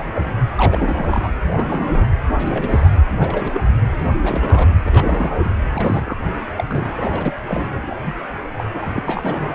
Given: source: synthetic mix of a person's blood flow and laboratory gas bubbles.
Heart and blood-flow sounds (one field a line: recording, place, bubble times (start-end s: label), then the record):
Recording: Doppler ultrasound of blood flow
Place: precordium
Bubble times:
0.00-0.11 s: bubbles
0.15-0.32 s: bubbles
0.56-1.28 s: bubbles
1.52-2.08 s: bubbles
2.35-2.96 s: bubbles
3.06-3.61 s: bubbles
3.98-4.11 s: bubbles
4.21-4.74 s: bubbles
4.82-5.33 s: bubbles
5.44-5.52 s: bubbles
5.69-6.16 s: bubbles
6.56-6.64 s: bubbles
6.67-7.32 s: bubbles
7.48-7.96 s: bubbles
8.05-8.12 s: bubbles
8.58-8.62 s: bubbles
8.74-9.55 s: bubbles
From the record:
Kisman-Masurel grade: 342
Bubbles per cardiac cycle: rolling drumbeat, 9 or more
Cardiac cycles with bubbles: 100%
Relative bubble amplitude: moderate (0.250 to 0.450)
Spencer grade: 3 (all of the cardiac periods contain showers or single bubble signals, but not dominating or overriding the cardiac motion signals)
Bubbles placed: anywhere in the cardiac cycle